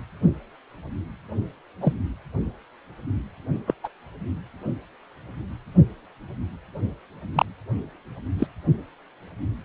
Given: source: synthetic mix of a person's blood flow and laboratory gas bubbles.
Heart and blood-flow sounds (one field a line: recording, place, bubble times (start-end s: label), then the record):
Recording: Doppler ultrasound of blood flow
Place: precordium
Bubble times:
1.80-1.93 s: bubbles
3.67-3.74 s: bubbles
3.84-3.89 s: bubbles
7.34-7.46 s: bubbles
8.38-8.47 s: bubbles
From the record:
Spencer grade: 2 (many but less than half of the cardiac periods contain bubble signals, singularly or in groups)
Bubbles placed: anywhere in the cardiac cycle